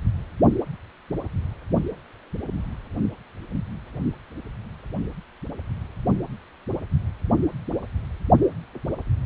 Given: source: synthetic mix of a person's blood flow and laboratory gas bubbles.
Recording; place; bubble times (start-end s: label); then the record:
Doppler ultrasound of blood flow; precordium
no bubbles
From the record:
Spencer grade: 0 (complete lack of bubble signals)